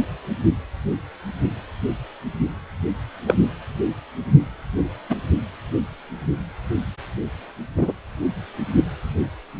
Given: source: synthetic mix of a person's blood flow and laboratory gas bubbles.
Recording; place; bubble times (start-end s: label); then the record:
Doppler ultrasound of blood flow; precordium
3.26-3.35 s: bubbles
5.09-5.16 s: bubbles
7.77-7.92 s: bubbles
From the record:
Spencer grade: 2 (many but less than half of the cardiac periods contain bubble signals, singularly or in groups); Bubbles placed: anywhere in the cardiac cycle